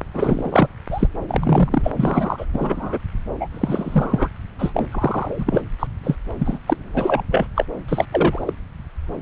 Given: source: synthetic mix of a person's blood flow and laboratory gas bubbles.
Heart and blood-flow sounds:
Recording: Doppler ultrasound of blood flow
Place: subclavian vein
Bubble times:
0.14-0.68 s: bubbles
0.90-1.07 s: bubbles
1.29-1.69 s: bubbles
1.71-1.91 s: bubbles
1.96-2.46 s: bubbles
2.53-2.99 s: bubbles
3.40-3.48 s: bubbles
3.52-4.29 s: bubbles
4.58-4.87 s: bubbles
4.92-5.62 s: bubbles
5.79-5.87 s: bubbles
6.03-6.16 s: bubbles
6.38-6.59 s: bubbles
6.67-6.77 s: bubbles
6.94-7.23 s: bubbles
7.31-7.47 s: bubbles
7.55-7.66 s: bubbles
7.88-8.05 s: bubbles
8.12-8.54 s: bubbles
From the record:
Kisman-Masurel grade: 233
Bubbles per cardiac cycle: several, 3 to 8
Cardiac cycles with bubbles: 50 to 99%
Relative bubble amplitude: loud (0.450 to 0.775)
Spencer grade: 3 (all of the cardiac periods contain showers or single bubble signals, but not dominating or overriding the cardiac motion signals)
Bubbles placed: anywhere in the cardiac cycle

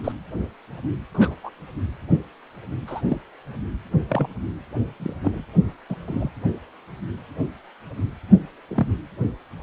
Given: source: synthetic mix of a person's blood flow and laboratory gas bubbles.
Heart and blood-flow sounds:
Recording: Doppler ultrasound of blood flow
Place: precordium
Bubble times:
0.04-0.12 s: bubbles
1.14-1.34 s: bubbles
1.43-1.50 s: bubbles
2.87-3.02 s: bubbles
3.08-3.21 s: bubbles
4.08-4.27 s: bubbles
5.00-5.13 s: bubbles
5.22-5.42 s: bubbles
5.89-5.96 s: bubbles
6.07-6.29 s: bubbles
8.68-8.87 s: bubbles
From the record:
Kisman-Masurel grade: 122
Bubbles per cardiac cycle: 1 to 2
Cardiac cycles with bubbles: 10 to 50%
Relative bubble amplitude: moderate (0.250 to 0.450)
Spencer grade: 2 (many but less than half of the cardiac periods contain bubble signals, singularly or in groups)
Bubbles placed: anywhere in the cardiac cycle

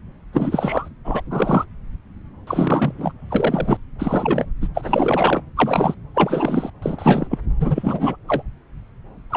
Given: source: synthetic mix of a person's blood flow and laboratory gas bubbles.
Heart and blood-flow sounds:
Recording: Doppler ultrasound of blood flow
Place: subclavian vein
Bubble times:
0.33-0.89 s: bubbles
1.04-1.22 s: bubbles
1.30-1.65 s: bubbles
2.47-3.13 s: bubbles
3.29-3.77 s: bubbles
3.98-4.45 s: bubbles
4.61-4.68 s: bubbles
4.74-5.42 s: bubbles
5.56-5.95 s: bubbles
6.14-6.70 s: bubbles
6.82-7.28 s: bubbles
7.30-7.38 s: bubbles
7.60-8.17 s: bubbles
8.28-8.42 s: bubbles
9.30-9.36 s: bubbles
From the record:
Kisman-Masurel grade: 333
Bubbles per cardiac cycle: rolling drumbeat, 9 or more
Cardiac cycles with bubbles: 50 to 99%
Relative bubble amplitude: loud (0.450 to 0.775)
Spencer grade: 3 (all of the cardiac periods contain showers or single bubble signals, but not dominating or overriding the cardiac motion signals)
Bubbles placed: anywhere in the cardiac cycle

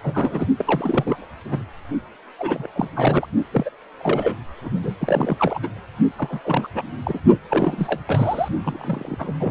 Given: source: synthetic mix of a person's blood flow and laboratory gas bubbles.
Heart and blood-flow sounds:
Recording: Doppler ultrasound of blood flow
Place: precordium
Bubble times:
0.03-0.47 s: bubbles
0.58-1.26 s: bubbles
1.44-1.64 s: bubbles
2.39-2.67 s: bubbles
2.75-2.88 s: bubbles
2.96-3.27 s: bubbles
3.52-3.70 s: bubbles
4.00-4.36 s: bubbles
4.62-4.70 s: bubbles
4.82-4.95 s: bubbles
5.00-5.59 s: bubbles
5.62-5.68 s: bubbles
6.18-6.40 s: bubbles
6.44-6.67 s: bubbles
6.74-6.83 s: bubbles
7.03-7.19 s: bubbles
7.50-8.00 s: bubbles
8.07-8.48 s: bubbles
8.64-9.15 s: bubbles
9.18-9.33 s: bubbles
9.39-9.51 s: bubbles
From the record:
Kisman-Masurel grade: 342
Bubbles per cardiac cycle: rolling drumbeat, 9 or more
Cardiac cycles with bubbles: 100%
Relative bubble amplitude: moderate (0.250 to 0.450)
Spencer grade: 3 (all of the cardiac periods contain showers or single bubble signals, but not dominating or overriding the cardiac motion signals)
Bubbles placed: only in the low amplitude regions of the cardiac cycle

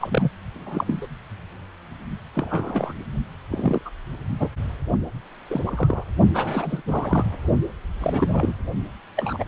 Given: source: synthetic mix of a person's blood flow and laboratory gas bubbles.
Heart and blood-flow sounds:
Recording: Doppler ultrasound of blood flow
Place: precordium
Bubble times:
0.00-0.29 s: bubbles
0.56-1.07 s: bubbles
2.35-2.93 s: bubbles
3.50-3.81 s: bubbles
3.85-3.90 s: bubbles
4.39-4.48 s: bubbles
5.50-5.61 s: bubbles
5.66-6.04 s: bubbles
6.34-6.81 s: bubbles
6.88-7.24 s: bubbles
8.00-8.54 s: bubbles
9.16-9.44 s: bubbles
From the record:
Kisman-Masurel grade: 242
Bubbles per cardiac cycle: several, 3 to 8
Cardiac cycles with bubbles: 100%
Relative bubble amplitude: moderate (0.250 to 0.450)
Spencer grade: 3 (all of the cardiac periods contain showers or single bubble signals, but not dominating or overriding the cardiac motion signals)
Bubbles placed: only in the low amplitude regions of the cardiac cycle

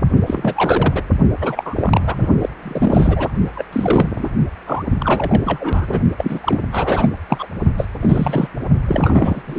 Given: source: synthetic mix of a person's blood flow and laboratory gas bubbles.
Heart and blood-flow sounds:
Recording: Doppler ultrasound of blood flow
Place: precordium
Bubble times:
0.00-0.02 s: bubbles
0.26-1.02 s: bubbles
1.41-2.28 s: bubbles
2.41-2.49 s: bubbles
2.62-3.32 s: bubbles
3.54-3.65 s: bubbles
3.72-4.29 s: bubbles
4.67-4.83 s: bubbles
5.00-6.01 s: bubbles
6.18-6.61 s: bubbles
6.72-7.09 s: bubbles
7.29-7.47 s: bubbles
7.77-7.87 s: bubbles
8.01-8.48 s: bubbles
8.88-9.42 s: bubbles
9.46-9.59 s: bubbles
From the record:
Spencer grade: 3 (all of the cardiac periods contain showers or single bubble signals, but not dominating or overriding the cardiac motion signals)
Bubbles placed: only in the low amplitude regions of the cardiac cycle

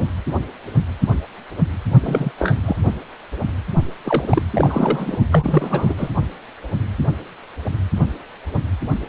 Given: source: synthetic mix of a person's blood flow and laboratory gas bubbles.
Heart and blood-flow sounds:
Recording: Doppler ultrasound of blood flow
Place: precordium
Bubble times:
2.01-2.31 s: bubbles
2.38-2.59 s: bubbles
2.65-2.76 s: bubbles
4.04-4.42 s: bubbles
4.51-5.17 s: bubbles
5.31-5.95 s: bubbles
5.97-6.10 s: bubbles
From the record:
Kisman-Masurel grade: 222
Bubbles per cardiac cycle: several, 3 to 8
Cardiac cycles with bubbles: 10 to 50%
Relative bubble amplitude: moderate (0.250 to 0.450)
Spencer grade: 2 (many but less than half of the cardiac periods contain bubble signals, singularly or in groups)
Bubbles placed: only in the low amplitude regions of the cardiac cycle

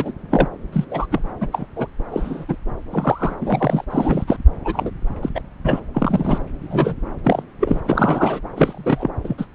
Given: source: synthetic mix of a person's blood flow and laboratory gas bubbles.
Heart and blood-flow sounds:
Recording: Doppler ultrasound of blood flow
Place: subclavian vein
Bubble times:
0.00-0.12 s: bubbles
0.30-0.48 s: bubbles
0.73-0.84 s: bubbles
0.91-1.06 s: bubbles
1.10-1.21 s: bubbles
1.41-1.49 s: bubbles
1.53-1.66 s: bubbles
1.76-1.87 s: bubbles
2.11-2.46 s: bubbles
2.48-2.56 s: bubbles
2.91-3.34 s: bubbles
3.41-3.84 s: bubbles
3.90-4.24 s: bubbles
4.27-4.38 s: bubbles
4.64-4.91 s: bubbles
5.22-5.29 s: bubbles
5.34-5.42 s: bubbles
5.63-5.80 s: bubbles
5.94-6.38 s: bubbles
6.62-6.95 s: bubbles
7.24-7.42 s: bubbles
7.60-7.81 s: bubbles
7.86-8.40 s: bubbles
8.55-9.10 s: bubbles
9.23-9.45 s: bubbles
From the record:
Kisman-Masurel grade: 242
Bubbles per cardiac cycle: several, 3 to 8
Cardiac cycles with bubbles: 100%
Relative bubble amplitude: moderate (0.250 to 0.450)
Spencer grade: 3 (all of the cardiac periods contain showers or single bubble signals, but not dominating or overriding the cardiac motion signals)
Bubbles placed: anywhere in the cardiac cycle

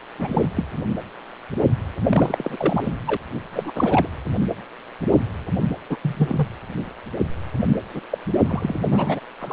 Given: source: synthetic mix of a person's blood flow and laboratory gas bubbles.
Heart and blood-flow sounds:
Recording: Doppler ultrasound of blood flow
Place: precordium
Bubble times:
0.18-0.48 s: bubbles
0.56-0.65 s: bubbles
2.10-2.92 s: bubbles
3.07-3.17 s: bubbles
3.52-3.72 s: bubbles
3.75-4.08 s: bubbles
5.89-5.97 s: bubbles
6.01-6.47 s: bubbles
7.66-7.78 s: bubbles
7.93-8.01 s: bubbles
8.11-8.18 s: bubbles
8.46-8.75 s: bubbles
8.90-9.20 s: bubbles
9.41-9.53 s: bubbles
From the record:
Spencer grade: 3 (all of the cardiac periods contain showers or single bubble signals, but not dominating or overriding the cardiac motion signals)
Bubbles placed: anywhere in the cardiac cycle

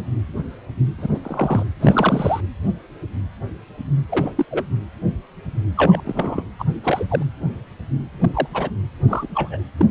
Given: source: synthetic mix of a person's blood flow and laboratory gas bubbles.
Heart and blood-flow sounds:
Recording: Doppler ultrasound of blood flow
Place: precordium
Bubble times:
0.97-1.07 s: bubbles
1.13-1.20 s: bubbles
1.23-1.63 s: bubbles
1.80-2.41 s: bubbles
4.09-4.46 s: bubbles
4.50-4.65 s: bubbles
5.76-6.00 s: bubbles
6.04-6.42 s: bubbles
6.59-6.64 s: bubbles
6.83-7.05 s: bubbles
7.08-7.23 s: bubbles
8.20-8.29 s: bubbles
8.33-8.47 s: bubbles
8.53-8.70 s: bubbles
9.08-9.28 s: bubbles
9.34-9.60 s: bubbles
9.77-9.86 s: bubbles
From the record:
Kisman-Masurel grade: 232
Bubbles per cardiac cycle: several, 3 to 8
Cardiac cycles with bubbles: 50 to 99%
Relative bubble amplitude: moderate (0.250 to 0.450)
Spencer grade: 3 (all of the cardiac periods contain showers or single bubble signals, but not dominating or overriding the cardiac motion signals)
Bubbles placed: anywhere in the cardiac cycle

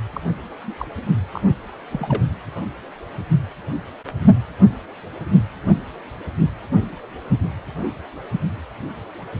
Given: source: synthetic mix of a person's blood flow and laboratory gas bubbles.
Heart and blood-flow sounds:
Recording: Doppler ultrasound of blood flow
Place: precordium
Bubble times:
0.13-0.20 s: bubbles
0.66-0.74 s: bubbles
0.78-0.88 s: bubbles
1.32-1.41 s: bubbles
1.91-2.24 s: bubbles
From the record:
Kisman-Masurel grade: 211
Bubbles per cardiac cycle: several, 3 to 8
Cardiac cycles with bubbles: 1 to 10%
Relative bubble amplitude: barely perceptible (0.100 to 0.250)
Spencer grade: 1 (occasional bubble signal discernible with the cardiac motion signal, with majority of cardiac periods free of bubbles)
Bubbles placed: anywhere in the cardiac cycle

